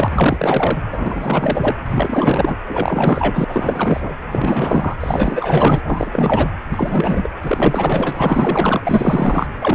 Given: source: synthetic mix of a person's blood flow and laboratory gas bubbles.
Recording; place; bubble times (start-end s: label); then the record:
Doppler ultrasound of blood flow; precordium
0.00-0.78 s: bubbles
0.91-1.76 s: bubbles
1.85-2.58 s: bubbles
2.67-3.44 s: bubbles
3.48-4.13 s: bubbles
4.31-4.95 s: bubbles
5.00-5.81 s: bubbles
5.84-6.57 s: bubbles
6.70-7.29 s: bubbles
7.42-9.47 s: bubbles
9.61-9.75 s: bubbles
From the record:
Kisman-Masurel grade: 444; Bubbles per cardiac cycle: continuous sound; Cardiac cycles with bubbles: 100%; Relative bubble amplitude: maximal (0.775 to 0.999); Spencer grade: 4 (maximum detectable bubble signal sounding continuously throughout systole and diastole of every cardiac period, and overriding the amplitude of the normal cardiac signals); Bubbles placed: anywhere in the cardiac cycle